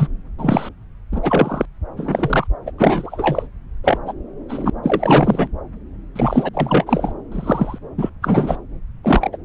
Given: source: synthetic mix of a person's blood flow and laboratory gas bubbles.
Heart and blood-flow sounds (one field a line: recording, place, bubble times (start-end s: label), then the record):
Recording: Doppler ultrasound of blood flow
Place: subclavian vein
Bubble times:
0.00-0.08 s: bubbles
0.38-0.69 s: bubbles
1.11-1.66 s: bubbles
1.97-2.47 s: bubbles
2.66-2.71 s: bubbles
2.78-3.47 s: bubbles
3.84-3.98 s: bubbles
4.06-4.13 s: bubbles
4.49-4.70 s: bubbles
4.83-5.48 s: bubbles
6.16-6.49 s: bubbles
6.54-7.13 s: bubbles
7.32-7.79 s: bubbles
7.98-8.09 s: bubbles
8.22-8.56 s: bubbles
9.03-9.38 s: bubbles
From the record:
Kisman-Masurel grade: 243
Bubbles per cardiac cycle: several, 3 to 8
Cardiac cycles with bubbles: 100%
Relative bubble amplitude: loud (0.450 to 0.775)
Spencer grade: 3 (all of the cardiac periods contain showers or single bubble signals, but not dominating or overriding the cardiac motion signals)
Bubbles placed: anywhere in the cardiac cycle